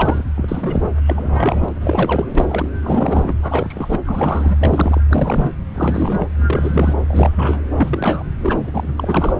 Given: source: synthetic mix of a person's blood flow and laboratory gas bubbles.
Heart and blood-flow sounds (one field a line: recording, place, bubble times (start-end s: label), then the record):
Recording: Doppler ultrasound of blood flow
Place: subclavian vein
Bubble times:
0.00-0.23 s: bubbles
0.36-0.92 s: bubbles
1.06-1.68 s: bubbles
1.76-2.27 s: bubbles
2.35-2.68 s: bubbles
2.83-3.34 s: bubbles
3.42-3.99 s: bubbles
4.05-4.57 s: bubbles
4.59-5.01 s: bubbles
5.08-5.51 s: bubbles
5.74-6.27 s: bubbles
6.38-6.94 s: bubbles
7.08-7.30 s: bubbles
7.36-7.62 s: bubbles
7.76-8.24 s: bubbles
8.42-8.93 s: bubbles
8.98-9.34 s: bubbles
From the record:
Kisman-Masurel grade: 332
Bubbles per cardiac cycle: rolling drumbeat, 9 or more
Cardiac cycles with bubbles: 50 to 99%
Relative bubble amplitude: moderate (0.250 to 0.450)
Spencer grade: 3 (all of the cardiac periods contain showers or single bubble signals, but not dominating or overriding the cardiac motion signals)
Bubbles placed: anywhere in the cardiac cycle